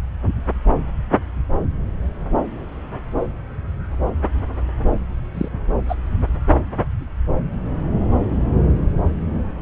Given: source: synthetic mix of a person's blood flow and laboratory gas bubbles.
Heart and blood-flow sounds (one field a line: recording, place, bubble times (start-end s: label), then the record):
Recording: Doppler ultrasound of blood flow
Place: subclavian vein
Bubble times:
5.34-5.48 s: bubbles
5.88-5.96 s: bubbles
From the record:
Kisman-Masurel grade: 113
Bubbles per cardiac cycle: 1 to 2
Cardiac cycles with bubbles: 1 to 10%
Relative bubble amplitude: loud (0.450 to 0.775)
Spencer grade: 1 (occasional bubble signal discernible with the cardiac motion signal, with majority of cardiac periods free of bubbles)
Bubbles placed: anywhere in the cardiac cycle